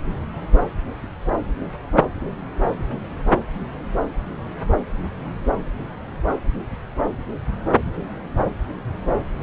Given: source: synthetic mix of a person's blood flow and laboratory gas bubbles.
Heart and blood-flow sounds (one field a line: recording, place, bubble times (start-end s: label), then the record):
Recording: Doppler ultrasound of blood flow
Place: subclavian vein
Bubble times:
no bubbles
From the record:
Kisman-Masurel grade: 000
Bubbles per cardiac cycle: 0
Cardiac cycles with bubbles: 0%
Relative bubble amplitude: no bubbles discernible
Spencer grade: 0 (complete lack of bubble signals)